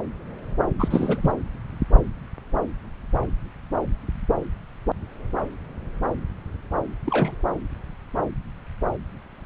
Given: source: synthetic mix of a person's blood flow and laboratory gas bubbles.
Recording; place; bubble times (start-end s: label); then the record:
Doppler ultrasound of blood flow; subclavian vein
0.79-1.31 s: bubbles
7.06-7.36 s: bubbles
From the record:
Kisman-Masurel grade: 222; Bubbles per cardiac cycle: several, 3 to 8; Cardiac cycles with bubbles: 10 to 50%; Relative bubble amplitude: moderate (0.250 to 0.450); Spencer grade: 2 (many but less than half of the cardiac periods contain bubble signals, singularly or in groups); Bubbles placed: anywhere in the cardiac cycle